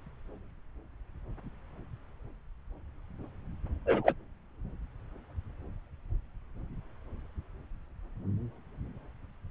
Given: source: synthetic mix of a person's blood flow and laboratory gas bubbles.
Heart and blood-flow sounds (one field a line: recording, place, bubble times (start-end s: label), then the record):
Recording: Doppler ultrasound of blood flow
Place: subclavian vein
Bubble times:
3.85-4.14 s: bubbles
From the record:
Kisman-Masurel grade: 111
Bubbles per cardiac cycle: 1 to 2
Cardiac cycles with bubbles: 1 to 10%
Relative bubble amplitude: barely perceptible (0.100 to 0.250)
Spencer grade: 1 (occasional bubble signal discernible with the cardiac motion signal, with majority of cardiac periods free of bubbles)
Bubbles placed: anywhere in the cardiac cycle